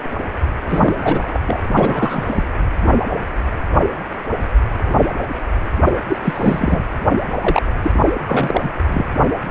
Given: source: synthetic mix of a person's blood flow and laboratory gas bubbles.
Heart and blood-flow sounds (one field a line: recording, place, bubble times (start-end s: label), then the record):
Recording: Doppler ultrasound of blood flow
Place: precordium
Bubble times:
0.67-0.95 s: bubbles
0.98-1.40 s: bubbles
1.47-1.61 s: bubbles
1.72-2.25 s: bubbles
2.28-2.44 s: bubbles
5.85-5.91 s: bubbles
6.08-6.19 s: bubbles
6.22-6.82 s: bubbles
7.40-7.62 s: bubbles
7.82-7.92 s: bubbles
8.04-8.13 s: bubbles
8.26-8.69 s: bubbles
8.88-9.04 s: bubbles
From the record:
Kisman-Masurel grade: 332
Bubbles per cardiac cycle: rolling drumbeat, 9 or more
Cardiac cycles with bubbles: 50 to 99%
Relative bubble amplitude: moderate (0.250 to 0.450)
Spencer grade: 3 (all of the cardiac periods contain showers or single bubble signals, but not dominating or overriding the cardiac motion signals)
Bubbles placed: anywhere in the cardiac cycle